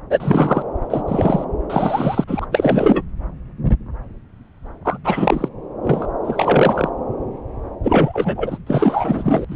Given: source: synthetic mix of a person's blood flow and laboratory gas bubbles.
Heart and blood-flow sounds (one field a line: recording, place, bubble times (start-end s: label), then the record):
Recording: Doppler ultrasound of blood flow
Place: subclavian vein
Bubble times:
0.10-0.62 s: bubbles
0.90-1.04 s: bubbles
1.07-1.45 s: bubbles
1.70-2.24 s: bubbles
2.27-2.46 s: bubbles
2.51-3.02 s: bubbles
4.85-4.99 s: bubbles
5.04-5.49 s: bubbles
5.83-6.07 s: bubbles
6.24-6.90 s: bubbles
7.83-8.58 s: bubbles
8.67-9.45 s: bubbles
9.48-9.56 s: bubbles
From the record:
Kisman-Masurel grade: 333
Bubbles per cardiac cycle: rolling drumbeat, 9 or more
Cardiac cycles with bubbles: 50 to 99%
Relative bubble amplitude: loud (0.450 to 0.775)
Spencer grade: 3 (all of the cardiac periods contain showers or single bubble signals, but not dominating or overriding the cardiac motion signals)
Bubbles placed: anywhere in the cardiac cycle